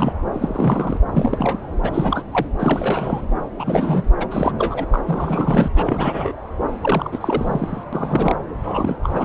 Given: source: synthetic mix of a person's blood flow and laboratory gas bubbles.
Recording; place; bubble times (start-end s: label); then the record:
Doppler ultrasound of blood flow; subclavian vein
0.00-0.13 s: bubbles
0.33-0.99 s: bubbles
1.14-1.79 s: bubbles
1.83-2.23 s: bubbles
2.31-2.47 s: bubbles
2.59-3.22 s: bubbles
3.59-4.03 s: bubbles
4.17-4.26 s: bubbles
4.30-4.52 s: bubbles
4.58-4.86 s: bubbles
4.92-4.99 s: bubbles
5.06-5.69 s: bubbles
5.75-6.32 s: bubbles
6.81-7.84 s: bubbles
7.92-8.35 s: bubbles
8.62-8.96 s: bubbles
9.03-9.25 s: bubbles
From the record:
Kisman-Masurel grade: 342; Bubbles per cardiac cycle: rolling drumbeat, 9 or more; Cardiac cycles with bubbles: 100%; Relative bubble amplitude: moderate (0.250 to 0.450); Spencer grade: 3 (all of the cardiac periods contain showers or single bubble signals, but not dominating or overriding the cardiac motion signals); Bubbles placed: anywhere in the cardiac cycle